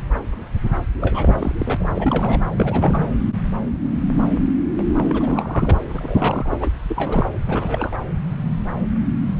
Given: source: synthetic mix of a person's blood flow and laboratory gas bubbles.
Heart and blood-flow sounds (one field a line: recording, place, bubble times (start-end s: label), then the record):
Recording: Doppler ultrasound of blood flow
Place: subclavian vein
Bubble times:
1.00-1.55 s: bubbles
1.58-1.87 s: bubbles
1.95-2.40 s: bubbles
2.57-3.08 s: bubbles
5.09-5.79 s: bubbles
5.96-6.57 s: bubbles
6.59-6.71 s: bubbles
6.88-7.32 s: bubbles
7.46-7.97 s: bubbles
From the record:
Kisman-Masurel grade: 332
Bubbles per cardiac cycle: rolling drumbeat, 9 or more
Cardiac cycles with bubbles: 50 to 99%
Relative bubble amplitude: moderate (0.250 to 0.450)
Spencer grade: 3 (all of the cardiac periods contain showers or single bubble signals, but not dominating or overriding the cardiac motion signals)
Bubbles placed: anywhere in the cardiac cycle